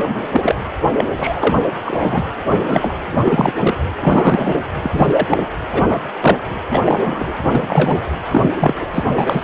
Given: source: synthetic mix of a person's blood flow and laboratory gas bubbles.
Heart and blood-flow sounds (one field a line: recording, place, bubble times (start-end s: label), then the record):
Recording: Doppler ultrasound of blood flow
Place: precordium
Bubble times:
0.01-0.27 s: bubbles
0.33-0.55 s: bubbles
0.97-1.04 s: bubbles
1.17-1.56 s: bubbles
1.85-2.25 s: bubbles
2.49-2.94 s: bubbles
3.11-3.19 s: bubbles
3.25-3.53 s: bubbles
3.58-3.75 s: bubbles
4.00-4.64 s: bubbles
4.83-5.27 s: bubbles
5.29-5.47 s: bubbles
5.72-5.83 s: bubbles
5.88-6.01 s: bubbles
6.21-6.41 s: bubbles
6.70-6.82 s: bubbles
6.85-7.35 s: bubbles
7.47-8.02 s: bubbles
8.31-8.50 s: bubbles
8.59-8.74 s: bubbles
8.80-8.86 s: bubbles
8.93-9.04 s: bubbles
9.18-9.44 s: bubbles
From the record:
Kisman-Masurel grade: 243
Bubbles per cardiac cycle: several, 3 to 8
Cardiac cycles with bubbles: 100%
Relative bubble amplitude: loud (0.450 to 0.775)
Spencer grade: 3 (all of the cardiac periods contain showers or single bubble signals, but not dominating or overriding the cardiac motion signals)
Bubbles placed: anywhere in the cardiac cycle